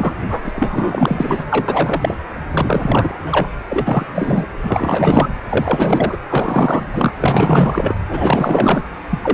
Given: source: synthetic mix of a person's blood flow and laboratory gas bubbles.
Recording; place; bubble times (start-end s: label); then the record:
Doppler ultrasound of blood flow; precordium
0.00-0.14 s: bubbles
0.29-0.52 s: bubbles
0.55-1.44 s: bubbles
1.50-2.15 s: bubbles
2.51-3.48 s: bubbles
3.69-4.05 s: bubbles
4.14-4.46 s: bubbles
4.62-5.28 s: bubbles
5.49-6.17 s: bubbles
6.29-7.12 s: bubbles
7.19-7.95 s: bubbles
8.09-8.83 s: bubbles
9.10-9.19 s: bubbles
9.22-9.34 s: bubbles
From the record:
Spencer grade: 4 (maximum detectable bubble signal sounding continuously throughout systole and diastole of every cardiac period, and overriding the amplitude of the normal cardiac signals); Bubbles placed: anywhere in the cardiac cycle